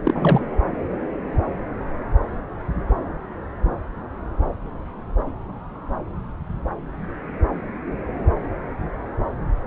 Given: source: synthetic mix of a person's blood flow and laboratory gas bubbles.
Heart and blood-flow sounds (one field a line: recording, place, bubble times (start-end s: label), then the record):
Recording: Doppler ultrasound of blood flow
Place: subclavian vein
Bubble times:
0.04-0.43 s: bubbles
From the record:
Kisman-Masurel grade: 212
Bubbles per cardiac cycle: several, 3 to 8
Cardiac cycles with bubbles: 1 to 10%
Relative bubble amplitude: moderate (0.250 to 0.450)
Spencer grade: 1 (occasional bubble signal discernible with the cardiac motion signal, with majority of cardiac periods free of bubbles)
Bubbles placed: anywhere in the cardiac cycle